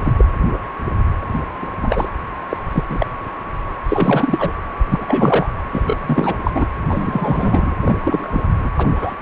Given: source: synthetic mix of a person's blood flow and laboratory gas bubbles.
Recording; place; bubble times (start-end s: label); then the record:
Doppler ultrasound of blood flow; precordium
0.02-0.13 s: bubbles
0.18-0.25 s: bubbles
1.62-1.67 s: bubbles
1.83-2.08 s: bubbles
2.49-2.57 s: bubbles
2.73-2.84 s: bubbles
2.89-3.06 s: bubbles
3.88-4.51 s: bubbles
4.91-5.46 s: bubbles
5.71-5.97 s: bubbles
6.00-6.35 s: bubbles
6.43-6.51 s: bubbles
6.54-6.66 s: bubbles
6.88-7.75 s: bubbles
7.85-7.98 s: bubbles
8.04-8.42 s: bubbles
8.60-8.69 s: bubbles
8.77-8.87 s: bubbles
8.95-9.15 s: bubbles
From the record:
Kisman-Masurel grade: 233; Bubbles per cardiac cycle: several, 3 to 8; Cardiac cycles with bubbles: 50 to 99%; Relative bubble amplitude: loud (0.450 to 0.775); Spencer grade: 3 (all of the cardiac periods contain showers or single bubble signals, but not dominating or overriding the cardiac motion signals); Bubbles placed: anywhere in the cardiac cycle